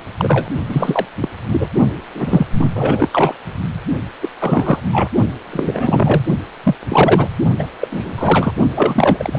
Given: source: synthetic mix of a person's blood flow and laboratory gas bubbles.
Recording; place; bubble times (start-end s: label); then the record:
Doppler ultrasound of blood flow; precordium
0.00-0.02 s: bubbles
0.17-0.48 s: bubbles
0.68-1.06 s: bubbles
1.20-1.29 s: bubbles
1.52-1.67 s: bubbles
2.15-2.47 s: bubbles
2.58-2.72 s: bubbles
2.75-3.08 s: bubbles
3.11-3.35 s: bubbles
4.22-4.28 s: bubbles
4.40-4.80 s: bubbles
4.92-5.09 s: bubbles
5.50-6.21 s: bubbles
6.63-6.75 s: bubbles
6.89-7.29 s: bubbles
7.58-7.67 s: bubbles
7.80-7.88 s: bubbles
7.90-8.13 s: bubbles
8.17-8.52 s: bubbles
8.75-9.39 s: bubbles
From the record:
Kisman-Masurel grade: 343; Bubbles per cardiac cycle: rolling drumbeat, 9 or more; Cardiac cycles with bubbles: 100%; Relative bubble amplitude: loud (0.450 to 0.775); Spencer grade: 3 (all of the cardiac periods contain showers or single bubble signals, but not dominating or overriding the cardiac motion signals); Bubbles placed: only in the low amplitude regions of the cardiac cycle